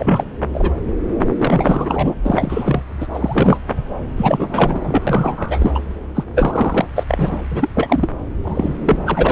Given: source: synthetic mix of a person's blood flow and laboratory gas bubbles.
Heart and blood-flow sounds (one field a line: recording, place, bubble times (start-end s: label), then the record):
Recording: Doppler ultrasound of blood flow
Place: subclavian vein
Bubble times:
0.00-0.24 s: bubbles
0.53-0.82 s: bubbles
1.38-2.12 s: bubbles
2.25-2.84 s: bubbles
3.00-3.07 s: bubbles
3.13-3.59 s: bubbles
4.17-5.03 s: bubbles
5.07-5.72 s: bubbles
5.75-5.79 s: bubbles
6.15-6.24 s: bubbles
6.35-6.87 s: bubbles
6.95-7.04 s: bubbles
7.08-7.42 s: bubbles
7.51-7.69 s: bubbles
7.73-8.08 s: bubbles
8.44-8.72 s: bubbles
8.84-8.96 s: bubbles
9.05-9.32 s: bubbles
From the record:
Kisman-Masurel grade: 343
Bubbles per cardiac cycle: rolling drumbeat, 9 or more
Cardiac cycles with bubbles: 100%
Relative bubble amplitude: loud (0.450 to 0.775)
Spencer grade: 3 (all of the cardiac periods contain showers or single bubble signals, but not dominating or overriding the cardiac motion signals)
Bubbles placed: anywhere in the cardiac cycle